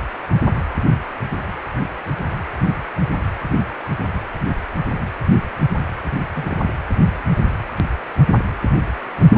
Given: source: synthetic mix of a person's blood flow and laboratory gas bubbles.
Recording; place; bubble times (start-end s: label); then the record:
Doppler ultrasound of blood flow; precordium
6.35-6.57 s: bubbles
From the record:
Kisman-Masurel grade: 111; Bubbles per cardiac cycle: 1 to 2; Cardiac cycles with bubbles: 1 to 10%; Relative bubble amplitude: barely perceptible (0.100 to 0.250); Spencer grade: 1 (occasional bubble signal discernible with the cardiac motion signal, with majority of cardiac periods free of bubbles); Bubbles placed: anywhere in the cardiac cycle